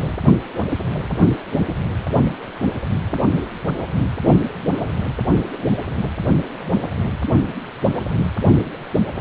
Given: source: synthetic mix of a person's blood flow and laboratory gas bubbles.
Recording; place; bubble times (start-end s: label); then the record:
Doppler ultrasound of blood flow; precordium
8.95-8.99 s: bubbles
From the record:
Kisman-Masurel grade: 111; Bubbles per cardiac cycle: 1 to 2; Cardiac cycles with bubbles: 1 to 10%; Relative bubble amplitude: barely perceptible (0.100 to 0.250); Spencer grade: 1 (occasional bubble signal discernible with the cardiac motion signal, with majority of cardiac periods free of bubbles); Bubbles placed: anywhere in the cardiac cycle